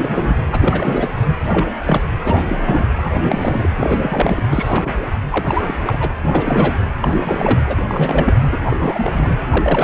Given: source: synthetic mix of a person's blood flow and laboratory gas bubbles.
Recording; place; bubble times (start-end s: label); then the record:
Doppler ultrasound of blood flow; precordium
0.00-0.41 s: bubbles
0.52-1.08 s: bubbles
1.40-1.70 s: bubbles
1.81-2.01 s: bubbles
2.25-2.89 s: bubbles
2.98-3.72 s: bubbles
3.75-4.42 s: bubbles
4.50-4.92 s: bubbles
5.30-5.75 s: bubbles
5.87-6.15 s: bubbles
6.23-6.75 s: bubbles
7.00-7.60 s: bubbles
7.67-7.82 s: bubbles
7.88-8.34 s: bubbles
8.51-8.59 s: bubbles
8.70-8.76 s: bubbles
8.78-9.38 s: bubbles
9.48-9.84 s: bubbles
From the record:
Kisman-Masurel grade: 342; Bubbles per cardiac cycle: rolling drumbeat, 9 or more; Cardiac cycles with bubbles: 100%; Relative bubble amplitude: moderate (0.250 to 0.450); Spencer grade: 3 (all of the cardiac periods contain showers or single bubble signals, but not dominating or overriding the cardiac motion signals); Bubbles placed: anywhere in the cardiac cycle